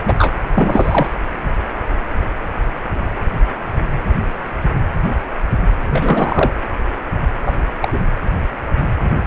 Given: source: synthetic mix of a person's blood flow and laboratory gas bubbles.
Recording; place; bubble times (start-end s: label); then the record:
Doppler ultrasound of blood flow; precordium
0.08-0.36 s: bubbles
0.54-1.08 s: bubbles
5.88-6.52 s: bubbles
7.46-7.55 s: bubbles
7.80-8.00 s: bubbles
From the record:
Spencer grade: 2 (many but less than half of the cardiac periods contain bubble signals, singularly or in groups); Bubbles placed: anywhere in the cardiac cycle